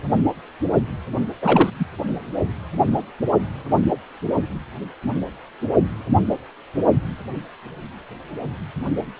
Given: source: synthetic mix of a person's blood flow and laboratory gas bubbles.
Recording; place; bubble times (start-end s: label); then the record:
Doppler ultrasound of blood flow; precordium
1.42-1.70 s: bubbles
1.79-1.85 s: bubbles
From the record:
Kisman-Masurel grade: 212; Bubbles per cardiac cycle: several, 3 to 8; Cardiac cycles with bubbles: 1 to 10%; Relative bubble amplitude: moderate (0.250 to 0.450); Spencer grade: 1 (occasional bubble signal discernible with the cardiac motion signal, with majority of cardiac periods free of bubbles); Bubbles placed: only in the low amplitude regions of the cardiac cycle